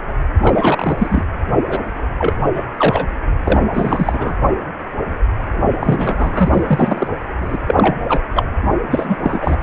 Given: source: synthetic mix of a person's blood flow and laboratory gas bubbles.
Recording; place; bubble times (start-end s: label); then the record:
Doppler ultrasound of blood flow; precordium
0.41-1.25 s: bubbles
1.68-1.81 s: bubbles
2.18-2.34 s: bubbles
2.54-2.64 s: bubbles
2.77-3.06 s: bubbles
3.44-3.60 s: bubbles
3.71-4.37 s: bubbles
5.80-7.08 s: bubbles
7.40-7.58 s: bubbles
7.67-7.95 s: bubbles
8.08-8.22 s: bubbles
8.35-8.45 s: bubbles
8.90-9.17 s: bubbles
9.19-9.63 s: bubbles
From the record:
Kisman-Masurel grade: 233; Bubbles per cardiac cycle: several, 3 to 8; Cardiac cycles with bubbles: 50 to 99%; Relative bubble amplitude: loud (0.450 to 0.775); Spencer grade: 3 (all of the cardiac periods contain showers or single bubble signals, but not dominating or overriding the cardiac motion signals); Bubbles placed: only in the low amplitude regions of the cardiac cycle